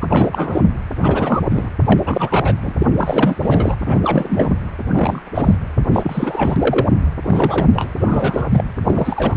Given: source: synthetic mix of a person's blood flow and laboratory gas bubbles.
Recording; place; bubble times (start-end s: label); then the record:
Doppler ultrasound of blood flow; precordium
0.01-0.05 s: bubbles
0.09-0.61 s: bubbles
0.96-1.42 s: bubbles
1.49-1.69 s: bubbles
1.86-2.00 s: bubbles
2.05-2.54 s: bubbles
2.61-2.73 s: bubbles
2.79-2.86 s: bubbles
2.98-3.35 s: bubbles
3.40-3.77 s: bubbles
3.85-4.01 s: bubbles
4.04-4.54 s: bubbles
4.91-5.22 s: bubbles
5.35-5.55 s: bubbles
5.93-6.88 s: bubbles
7.25-7.90 s: bubbles
8.00-8.64 s: bubbles
8.83-9.37 s: bubbles
From the record:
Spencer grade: 3 (all of the cardiac periods contain showers or single bubble signals, but not dominating or overriding the cardiac motion signals); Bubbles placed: anywhere in the cardiac cycle